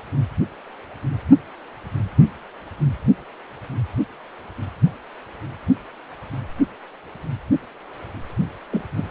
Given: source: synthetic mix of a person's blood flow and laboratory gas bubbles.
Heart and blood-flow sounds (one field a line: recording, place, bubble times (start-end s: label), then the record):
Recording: Doppler ultrasound of blood flow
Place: precordium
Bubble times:
8.71-8.81 s: bubbles
8.97-9.08 s: bubbles
From the record:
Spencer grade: 1 (occasional bubble signal discernible with the cardiac motion signal, with majority of cardiac periods free of bubbles)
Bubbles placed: anywhere in the cardiac cycle